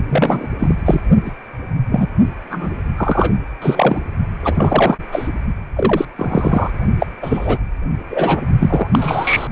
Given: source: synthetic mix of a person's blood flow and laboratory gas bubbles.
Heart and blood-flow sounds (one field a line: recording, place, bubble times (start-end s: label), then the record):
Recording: Doppler ultrasound of blood flow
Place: precordium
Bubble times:
0.08-0.47 s: bubbles
0.58-0.75 s: bubbles
0.85-1.01 s: bubbles
1.26-1.31 s: bubbles
1.91-2.08 s: bubbles
2.50-2.75 s: bubbles
2.96-3.35 s: bubbles
3.61-4.02 s: bubbles
4.43-4.97 s: bubbles
5.12-5.29 s: bubbles
5.76-6.05 s: bubbles
6.17-6.70 s: bubbles
6.99-7.07 s: bubbles
7.22-7.58 s: bubbles
8.10-8.46 s: bubbles
8.58-9.47 s: bubbles
From the record:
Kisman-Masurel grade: 233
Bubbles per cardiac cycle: several, 3 to 8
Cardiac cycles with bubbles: 50 to 99%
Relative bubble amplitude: loud (0.450 to 0.775)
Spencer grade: 3 (all of the cardiac periods contain showers or single bubble signals, but not dominating or overriding the cardiac motion signals)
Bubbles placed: only in the low amplitude regions of the cardiac cycle